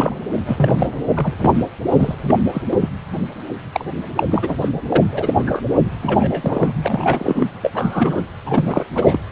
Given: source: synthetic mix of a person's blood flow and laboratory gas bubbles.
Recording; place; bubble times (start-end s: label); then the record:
Doppler ultrasound of blood flow; precordium
0.00-0.14 s: bubbles
0.45-1.01 s: bubbles
1.08-1.34 s: bubbles
1.43-1.64 s: bubbles
1.89-2.15 s: bubbles
2.28-2.34 s: bubbles
2.52-2.62 s: bubbles
2.71-2.77 s: bubbles
2.80-2.89 s: bubbles
3.72-3.85 s: bubbles
4.15-4.23 s: bubbles
4.30-4.56 s: bubbles
4.60-4.68 s: bubbles
4.88-5.04 s: bubbles
5.11-5.61 s: bubbles
6.02-6.73 s: bubbles
6.83-7.50 s: bubbles
7.62-7.70 s: bubbles
7.75-8.22 s: bubbles
8.46-8.84 s: bubbles
8.95-9.19 s: bubbles
From the record:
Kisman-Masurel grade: 232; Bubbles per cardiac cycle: several, 3 to 8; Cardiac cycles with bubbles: 50 to 99%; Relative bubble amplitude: moderate (0.250 to 0.450); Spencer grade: 3 (all of the cardiac periods contain showers or single bubble signals, but not dominating or overriding the cardiac motion signals); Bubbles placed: anywhere in the cardiac cycle